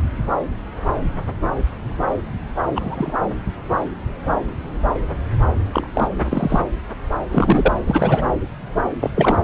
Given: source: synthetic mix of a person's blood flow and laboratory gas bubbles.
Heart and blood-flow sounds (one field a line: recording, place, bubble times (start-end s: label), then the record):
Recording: Doppler ultrasound of blood flow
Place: subclavian vein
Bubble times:
2.75-3.12 s: bubbles
5.73-5.88 s: bubbles
5.93-6.08 s: bubbles
6.25-6.61 s: bubbles
7.30-7.76 s: bubbles
7.87-8.25 s: bubbles
8.99-9.11 s: bubbles
9.15-9.39 s: bubbles
From the record:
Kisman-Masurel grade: 223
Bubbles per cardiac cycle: several, 3 to 8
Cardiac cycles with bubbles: 10 to 50%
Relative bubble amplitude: loud (0.450 to 0.775)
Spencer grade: 2 (many but less than half of the cardiac periods contain bubble signals, singularly or in groups)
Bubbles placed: anywhere in the cardiac cycle